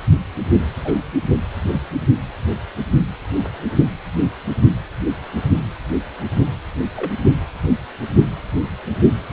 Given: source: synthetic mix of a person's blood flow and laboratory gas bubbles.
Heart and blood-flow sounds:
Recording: Doppler ultrasound of blood flow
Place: precordium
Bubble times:
0.84-0.94 s: bubbles
6.96-7.11 s: bubbles
From the record:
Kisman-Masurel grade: 111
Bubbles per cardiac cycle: 1 to 2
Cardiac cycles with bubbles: 1 to 10%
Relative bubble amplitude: barely perceptible (0.100 to 0.250)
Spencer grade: 1 (occasional bubble signal discernible with the cardiac motion signal, with majority of cardiac periods free of bubbles)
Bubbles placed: only in the low amplitude regions of the cardiac cycle

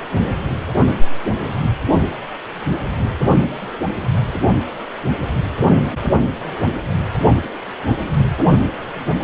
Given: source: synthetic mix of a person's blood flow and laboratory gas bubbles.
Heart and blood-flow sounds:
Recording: Doppler ultrasound of blood flow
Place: precordium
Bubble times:
no bubbles
From the record:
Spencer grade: 0 (complete lack of bubble signals)

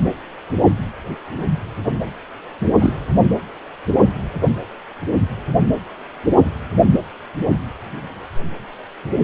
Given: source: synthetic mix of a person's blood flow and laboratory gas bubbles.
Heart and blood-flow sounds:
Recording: Doppler ultrasound of blood flow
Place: precordium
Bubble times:
2.79-3.06 s: bubbles
From the record:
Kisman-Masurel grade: 113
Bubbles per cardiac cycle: 1 to 2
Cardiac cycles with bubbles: 1 to 10%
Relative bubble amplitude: loud (0.450 to 0.775)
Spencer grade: 1 (occasional bubble signal discernible with the cardiac motion signal, with majority of cardiac periods free of bubbles)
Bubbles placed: anywhere in the cardiac cycle

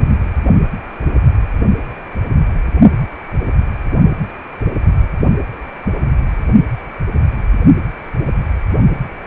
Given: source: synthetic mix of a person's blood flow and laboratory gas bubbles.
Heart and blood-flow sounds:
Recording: Doppler ultrasound of blood flow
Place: precordium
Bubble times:
0.03-0.16 s: bubbles
From the record:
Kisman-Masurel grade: 111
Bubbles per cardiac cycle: 1 to 2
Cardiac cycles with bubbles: 1 to 10%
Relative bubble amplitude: barely perceptible (0.100 to 0.250)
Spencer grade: 1 (occasional bubble signal discernible with the cardiac motion signal, with majority of cardiac periods free of bubbles)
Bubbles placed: only in the low amplitude regions of the cardiac cycle

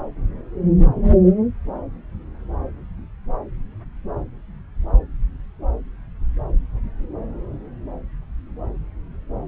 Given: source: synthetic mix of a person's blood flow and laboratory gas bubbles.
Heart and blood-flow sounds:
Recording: Doppler ultrasound of blood flow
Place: subclavian vein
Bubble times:
no bubbles
From the record:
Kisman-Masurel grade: 000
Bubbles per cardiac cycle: 0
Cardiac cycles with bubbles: 0%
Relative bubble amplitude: no bubbles discernible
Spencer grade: 0 (complete lack of bubble signals)

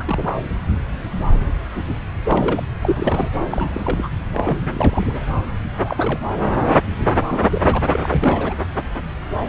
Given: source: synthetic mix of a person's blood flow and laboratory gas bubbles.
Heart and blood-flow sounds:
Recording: Doppler ultrasound of blood flow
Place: subclavian vein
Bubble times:
0.00-0.39 s: bubbles
2.25-2.63 s: bubbles
2.83-3.29 s: bubbles
3.50-4.09 s: bubbles
4.33-4.58 s: bubbles
4.60-5.24 s: bubbles
5.74-6.19 s: bubbles
7.29-7.83 s: bubbles
7.91-8.54 s: bubbles
From the record:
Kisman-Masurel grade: 332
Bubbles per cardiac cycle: rolling drumbeat, 9 or more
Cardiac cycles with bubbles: 50 to 99%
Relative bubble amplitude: moderate (0.250 to 0.450)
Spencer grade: 3 (all of the cardiac periods contain showers or single bubble signals, but not dominating or overriding the cardiac motion signals)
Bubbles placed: anywhere in the cardiac cycle

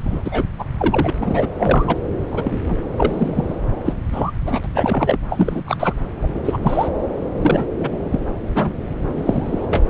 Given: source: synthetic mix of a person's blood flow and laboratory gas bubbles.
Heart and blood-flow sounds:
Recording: Doppler ultrasound of blood flow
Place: subclavian vein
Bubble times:
0.05-0.45 s: bubbles
0.59-0.64 s: bubbles
0.77-1.10 s: bubbles
1.20-1.47 s: bubbles
1.57-1.98 s: bubbles
2.31-2.60 s: bubbles
2.65-2.80 s: bubbles
2.92-3.56 s: bubbles
3.85-3.94 s: bubbles
4.12-4.32 s: bubbles
4.46-4.69 s: bubbles
4.74-5.17 s: bubbles
5.29-5.62 s: bubbles
5.66-5.77 s: bubbles
5.79-5.94 s: bubbles
6.21-6.28 s: bubbles
6.34-6.41 s: bubbles
6.45-6.58 s: bubbles
6.62-6.88 s: bubbles
7.34-7.66 s: bubbles
7.79-7.88 s: bubbles
8.11-8.20 s: bubbles
8.55-8.71 s: bubbles
9.18-9.66 s: bubbles
9.70-9.84 s: bubbles
From the record:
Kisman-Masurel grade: 243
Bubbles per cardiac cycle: several, 3 to 8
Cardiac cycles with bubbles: 100%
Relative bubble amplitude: loud (0.450 to 0.775)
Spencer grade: 3 (all of the cardiac periods contain showers or single bubble signals, but not dominating or overriding the cardiac motion signals)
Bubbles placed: anywhere in the cardiac cycle

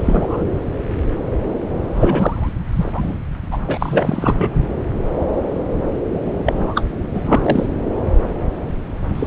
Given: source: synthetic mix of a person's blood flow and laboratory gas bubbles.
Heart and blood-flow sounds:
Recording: Doppler ultrasound of blood flow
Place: subclavian vein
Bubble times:
0.00-0.45 s: bubbles
1.93-2.53 s: bubbles
2.73-3.19 s: bubbles
3.51-3.58 s: bubbles
3.62-4.65 s: bubbles
6.46-6.84 s: bubbles
7.13-7.21 s: bubbles
7.25-7.66 s: bubbles
9.15-9.27 s: bubbles
From the record:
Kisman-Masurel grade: 333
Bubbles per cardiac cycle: rolling drumbeat, 9 or more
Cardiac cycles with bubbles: 50 to 99%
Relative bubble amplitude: loud (0.450 to 0.775)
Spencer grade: 3 (all of the cardiac periods contain showers or single bubble signals, but not dominating or overriding the cardiac motion signals)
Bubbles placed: anywhere in the cardiac cycle

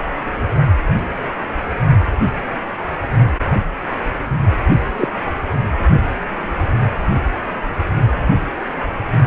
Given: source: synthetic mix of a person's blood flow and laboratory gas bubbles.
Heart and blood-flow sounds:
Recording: Doppler ultrasound of blood flow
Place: precordium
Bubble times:
4.96-5.08 s: bubbles
From the record:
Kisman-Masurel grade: 123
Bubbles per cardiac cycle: 1 to 2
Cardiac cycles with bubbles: 10 to 50%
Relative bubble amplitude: loud (0.450 to 0.775)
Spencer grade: 2 (many but less than half of the cardiac periods contain bubble signals, singularly or in groups)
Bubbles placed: anywhere in the cardiac cycle

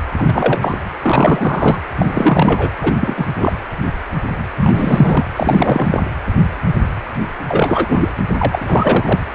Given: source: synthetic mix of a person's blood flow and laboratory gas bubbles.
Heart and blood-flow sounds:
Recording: Doppler ultrasound of blood flow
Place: precordium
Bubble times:
0.18-0.78 s: bubbles
1.02-1.78 s: bubbles
1.98-2.71 s: bubbles
2.82-2.93 s: bubbles
2.99-3.26 s: bubbles
3.38-3.52 s: bubbles
4.56-5.26 s: bubbles
5.36-6.01 s: bubbles
7.48-8.11 s: bubbles
8.38-9.25 s: bubbles
From the record:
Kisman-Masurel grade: 333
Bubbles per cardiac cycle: rolling drumbeat, 9 or more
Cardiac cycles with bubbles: 50 to 99%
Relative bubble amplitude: loud (0.450 to 0.775)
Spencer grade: 3 (all of the cardiac periods contain showers or single bubble signals, but not dominating or overriding the cardiac motion signals)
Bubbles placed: anywhere in the cardiac cycle

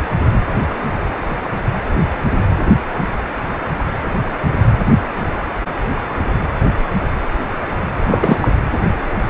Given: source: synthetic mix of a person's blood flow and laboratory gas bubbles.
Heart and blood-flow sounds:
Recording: Doppler ultrasound of blood flow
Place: precordium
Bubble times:
8.05-8.48 s: bubbles
From the record:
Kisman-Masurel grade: 213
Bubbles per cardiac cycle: several, 3 to 8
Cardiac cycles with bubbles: 1 to 10%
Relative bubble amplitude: loud (0.450 to 0.775)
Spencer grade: 1 (occasional bubble signal discernible with the cardiac motion signal, with majority of cardiac periods free of bubbles)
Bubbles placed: anywhere in the cardiac cycle

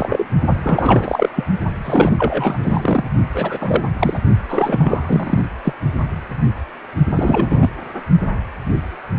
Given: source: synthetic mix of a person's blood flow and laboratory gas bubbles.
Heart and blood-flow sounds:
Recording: Doppler ultrasound of blood flow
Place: precordium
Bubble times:
0.00-0.26 s: bubbles
0.63-1.29 s: bubbles
1.35-1.45 s: bubbles
1.85-2.59 s: bubbles
2.62-3.04 s: bubbles
3.33-3.84 s: bubbles
3.99-4.18 s: bubbles
4.48-5.46 s: bubbles
5.64-5.73 s: bubbles
7.15-7.69 s: bubbles
From the record:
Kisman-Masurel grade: 333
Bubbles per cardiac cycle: rolling drumbeat, 9 or more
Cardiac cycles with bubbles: 50 to 99%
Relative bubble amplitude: loud (0.450 to 0.775)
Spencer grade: 3 (all of the cardiac periods contain showers or single bubble signals, but not dominating or overriding the cardiac motion signals)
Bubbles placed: only in the low amplitude regions of the cardiac cycle

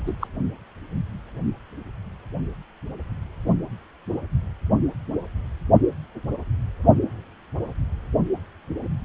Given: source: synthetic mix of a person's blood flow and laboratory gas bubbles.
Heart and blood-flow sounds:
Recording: Doppler ultrasound of blood flow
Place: precordium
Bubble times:
0.07-0.14 s: bubbles
0.20-0.27 s: bubbles
From the record:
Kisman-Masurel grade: 211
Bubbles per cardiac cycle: several, 3 to 8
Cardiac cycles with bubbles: 1 to 10%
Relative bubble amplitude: barely perceptible (0.100 to 0.250)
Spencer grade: 1 (occasional bubble signal discernible with the cardiac motion signal, with majority of cardiac periods free of bubbles)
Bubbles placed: only in the low amplitude regions of the cardiac cycle

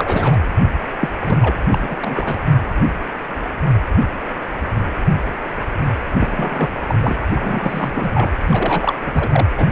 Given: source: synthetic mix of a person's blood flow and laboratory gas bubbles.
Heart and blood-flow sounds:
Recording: Doppler ultrasound of blood flow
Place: precordium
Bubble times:
0.00-0.39 s: bubbles
1.01-1.08 s: bubbles
1.25-1.39 s: bubbles
1.42-1.55 s: bubbles
1.70-1.78 s: bubbles
1.81-1.96 s: bubbles
2.01-2.38 s: bubbles
6.20-6.79 s: bubbles
6.89-6.95 s: bubbles
7.02-7.17 s: bubbles
7.35-8.30 s: bubbles
8.46-8.96 s: bubbles
9.05-9.29 s: bubbles
9.33-9.47 s: bubbles
9.56-9.65 s: bubbles
From the record:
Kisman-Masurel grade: 332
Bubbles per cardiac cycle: rolling drumbeat, 9 or more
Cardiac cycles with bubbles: 50 to 99%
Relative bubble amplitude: moderate (0.250 to 0.450)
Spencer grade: 3 (all of the cardiac periods contain showers or single bubble signals, but not dominating or overriding the cardiac motion signals)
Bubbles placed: anywhere in the cardiac cycle

